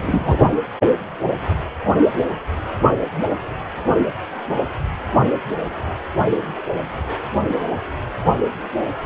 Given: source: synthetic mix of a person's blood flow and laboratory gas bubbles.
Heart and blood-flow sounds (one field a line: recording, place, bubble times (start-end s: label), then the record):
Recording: Doppler ultrasound of blood flow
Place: precordium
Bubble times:
0.00-0.37 s: bubbles
From the record:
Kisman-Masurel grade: 223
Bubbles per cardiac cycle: several, 3 to 8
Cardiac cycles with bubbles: 10 to 50%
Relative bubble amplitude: loud (0.450 to 0.775)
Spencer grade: 2 (many but less than half of the cardiac periods contain bubble signals, singularly or in groups)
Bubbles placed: only in the low amplitude regions of the cardiac cycle